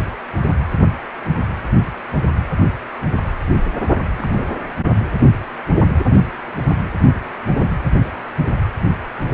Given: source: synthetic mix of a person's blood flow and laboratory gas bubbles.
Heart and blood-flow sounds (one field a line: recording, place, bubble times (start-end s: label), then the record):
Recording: Doppler ultrasound of blood flow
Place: precordium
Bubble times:
4.18-4.46 s: bubbles
From the record:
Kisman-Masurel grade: 111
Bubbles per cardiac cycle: 1 to 2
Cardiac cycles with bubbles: 1 to 10%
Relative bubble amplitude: barely perceptible (0.100 to 0.250)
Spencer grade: 1 (occasional bubble signal discernible with the cardiac motion signal, with majority of cardiac periods free of bubbles)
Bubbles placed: anywhere in the cardiac cycle